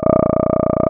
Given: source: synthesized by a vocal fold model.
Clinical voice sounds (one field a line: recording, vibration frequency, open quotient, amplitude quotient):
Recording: sustained vowel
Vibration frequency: 30 Hz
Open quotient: 0.1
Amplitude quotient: 1.2